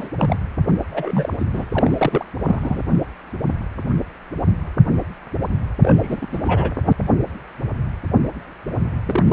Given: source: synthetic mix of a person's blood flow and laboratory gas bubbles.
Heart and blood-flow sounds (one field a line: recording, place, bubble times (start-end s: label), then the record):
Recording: Doppler ultrasound of blood flow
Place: precordium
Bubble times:
0.00-0.09 s: bubbles
0.18-0.37 s: bubbles
0.90-1.33 s: bubbles
1.38-1.45 s: bubbles
1.51-1.65 s: bubbles
1.72-2.25 s: bubbles
2.44-2.81 s: bubbles
5.82-6.27 s: bubbles
6.32-6.73 s: bubbles
9.03-9.32 s: bubbles
From the record:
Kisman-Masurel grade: 332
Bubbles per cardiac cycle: rolling drumbeat, 9 or more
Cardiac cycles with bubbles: 50 to 99%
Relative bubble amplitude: moderate (0.250 to 0.450)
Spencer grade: 3 (all of the cardiac periods contain showers or single bubble signals, but not dominating or overriding the cardiac motion signals)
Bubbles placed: anywhere in the cardiac cycle